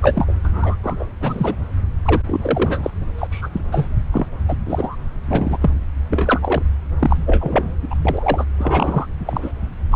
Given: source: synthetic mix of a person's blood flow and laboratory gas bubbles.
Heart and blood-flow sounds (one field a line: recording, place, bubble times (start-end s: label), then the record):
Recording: Doppler ultrasound of blood flow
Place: subclavian vein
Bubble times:
0.01-0.34 s: bubbles
0.44-0.77 s: bubbles
0.82-1.05 s: bubbles
1.21-1.55 s: bubbles
2.05-2.22 s: bubbles
2.27-2.91 s: bubbles
3.18-3.28 s: bubbles
3.31-3.49 s: bubbles
3.53-3.64 s: bubbles
3.72-3.88 s: bubbles
4.12-4.26 s: bubbles
4.48-4.56 s: bubbles
4.65-4.96 s: bubbles
5.28-5.58 s: bubbles
5.60-5.71 s: bubbles
6.09-6.62 s: bubbles
6.99-7.71 s: bubbles
7.81-7.95 s: bubbles
8.05-8.46 s: bubbles
8.58-9.06 s: bubbles
9.26-9.52 s: bubbles
9.91-9.95 s: bubbles
From the record:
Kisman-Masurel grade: 243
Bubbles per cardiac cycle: several, 3 to 8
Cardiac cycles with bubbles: 100%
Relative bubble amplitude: loud (0.450 to 0.775)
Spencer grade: 3 (all of the cardiac periods contain showers or single bubble signals, but not dominating or overriding the cardiac motion signals)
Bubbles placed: anywhere in the cardiac cycle